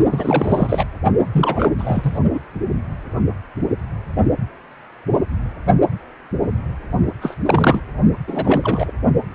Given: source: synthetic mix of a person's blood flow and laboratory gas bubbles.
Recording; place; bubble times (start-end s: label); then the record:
Doppler ultrasound of blood flow; precordium
0.11-0.84 s: bubbles
1.33-1.69 s: bubbles
1.78-2.19 s: bubbles
2.33-2.39 s: bubbles
7.21-7.37 s: bubbles
7.46-7.80 s: bubbles
8.27-8.90 s: bubbles
From the record:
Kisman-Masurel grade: 332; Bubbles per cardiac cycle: rolling drumbeat, 9 or more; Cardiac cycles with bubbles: 50 to 99%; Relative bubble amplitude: moderate (0.250 to 0.450); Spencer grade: 3 (all of the cardiac periods contain showers or single bubble signals, but not dominating or overriding the cardiac motion signals); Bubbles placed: only in the low amplitude regions of the cardiac cycle